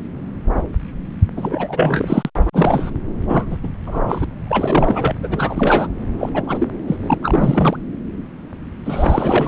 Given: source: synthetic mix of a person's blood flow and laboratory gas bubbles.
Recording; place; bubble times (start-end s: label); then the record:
Doppler ultrasound of blood flow; subclavian vein
1.36-2.30 s: bubbles
2.35-2.41 s: bubbles
2.53-2.91 s: bubbles
3.28-3.46 s: bubbles
3.50-3.57 s: bubbles
3.63-3.72 s: bubbles
3.86-4.25 s: bubbles
4.47-5.15 s: bubbles
5.23-5.87 s: bubbles
6.18-6.29 s: bubbles
6.34-6.42 s: bubbles
6.46-6.67 s: bubbles
6.87-6.96 s: bubbles
7.00-7.14 s: bubbles
7.22-7.77 s: bubbles
8.85-9.48 s: bubbles
From the record:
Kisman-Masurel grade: 332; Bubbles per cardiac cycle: rolling drumbeat, 9 or more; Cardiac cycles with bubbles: 50 to 99%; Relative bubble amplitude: moderate (0.250 to 0.450); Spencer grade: 3 (all of the cardiac periods contain showers or single bubble signals, but not dominating or overriding the cardiac motion signals); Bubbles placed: anywhere in the cardiac cycle